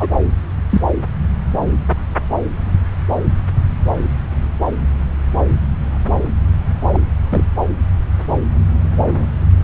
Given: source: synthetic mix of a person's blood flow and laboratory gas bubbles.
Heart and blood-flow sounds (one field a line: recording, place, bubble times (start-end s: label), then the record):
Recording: Doppler ultrasound of blood flow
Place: subclavian vein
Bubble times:
0.00-0.10 s: bubbles
0.70-0.81 s: bubbles
6.92-6.99 s: bubbles
7.29-7.43 s: bubbles
From the record:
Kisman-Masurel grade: 123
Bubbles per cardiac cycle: 1 to 2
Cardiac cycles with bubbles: 10 to 50%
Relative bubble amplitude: loud (0.450 to 0.775)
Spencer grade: 2 (many but less than half of the cardiac periods contain bubble signals, singularly or in groups)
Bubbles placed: anywhere in the cardiac cycle